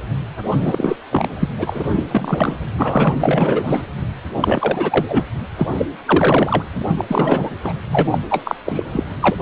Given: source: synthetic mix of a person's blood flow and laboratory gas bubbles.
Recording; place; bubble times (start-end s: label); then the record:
Doppler ultrasound of blood flow; precordium
0.51-0.97 s: bubbles
1.11-1.27 s: bubbles
1.39-1.49 s: bubbles
1.58-2.04 s: bubbles
2.08-2.54 s: bubbles
2.79-3.13 s: bubbles
3.20-3.82 s: bubbles
4.40-5.05 s: bubbles
5.08-5.24 s: bubbles
5.57-5.67 s: bubbles
5.75-5.86 s: bubbles
6.05-6.63 s: bubbles
6.67-7.05 s: bubbles
7.08-7.50 s: bubbles
7.63-7.73 s: bubbles
7.90-8.18 s: bubbles
8.29-8.55 s: bubbles
8.66-8.83 s: bubbles
8.92-9.03 s: bubbles
9.21-9.36 s: bubbles
From the record:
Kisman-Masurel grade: 343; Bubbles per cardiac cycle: rolling drumbeat, 9 or more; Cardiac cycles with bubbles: 100%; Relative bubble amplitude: loud (0.450 to 0.775); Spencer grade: 3 (all of the cardiac periods contain showers or single bubble signals, but not dominating or overriding the cardiac motion signals); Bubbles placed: anywhere in the cardiac cycle